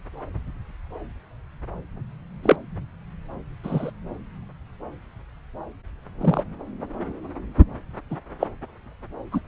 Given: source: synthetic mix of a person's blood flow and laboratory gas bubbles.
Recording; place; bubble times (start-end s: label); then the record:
Doppler ultrasound of blood flow; subclavian vein
2.43-2.56 s: bubbles
3.64-3.91 s: bubbles
6.21-6.43 s: bubbles
8.11-8.17 s: bubbles
8.40-8.47 s: bubbles
9.32-9.40 s: bubbles
From the record:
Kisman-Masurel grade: 122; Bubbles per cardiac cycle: 1 to 2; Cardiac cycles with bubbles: 10 to 50%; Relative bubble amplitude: moderate (0.250 to 0.450); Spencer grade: 2 (many but less than half of the cardiac periods contain bubble signals, singularly or in groups); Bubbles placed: anywhere in the cardiac cycle